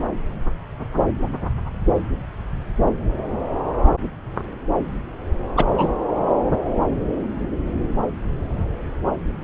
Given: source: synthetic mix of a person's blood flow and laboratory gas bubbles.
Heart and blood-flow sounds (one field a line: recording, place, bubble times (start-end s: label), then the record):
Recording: Doppler ultrasound of blood flow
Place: subclavian vein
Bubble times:
5.57-5.65 s: bubbles
5.78-5.88 s: bubbles
From the record:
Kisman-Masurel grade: 113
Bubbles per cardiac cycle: 1 to 2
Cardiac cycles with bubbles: 1 to 10%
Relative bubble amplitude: loud (0.450 to 0.775)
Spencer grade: 1 (occasional bubble signal discernible with the cardiac motion signal, with majority of cardiac periods free of bubbles)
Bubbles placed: anywhere in the cardiac cycle